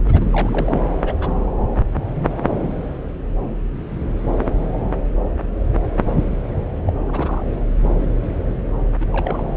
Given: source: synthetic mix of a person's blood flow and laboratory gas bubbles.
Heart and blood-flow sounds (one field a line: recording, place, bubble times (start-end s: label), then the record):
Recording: Doppler ultrasound of blood flow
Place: subclavian vein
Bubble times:
0.05-0.26 s: bubbles
0.32-0.81 s: bubbles
1.04-1.17 s: bubbles
1.20-1.31 s: bubbles
6.87-6.93 s: bubbles
7.07-7.54 s: bubbles
9.00-9.06 s: bubbles
9.12-9.49 s: bubbles
From the record:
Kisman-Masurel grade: 221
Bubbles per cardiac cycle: several, 3 to 8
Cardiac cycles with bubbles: 10 to 50%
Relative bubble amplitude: barely perceptible (0.100 to 0.250)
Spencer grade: 2 (many but less than half of the cardiac periods contain bubble signals, singularly or in groups)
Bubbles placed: anywhere in the cardiac cycle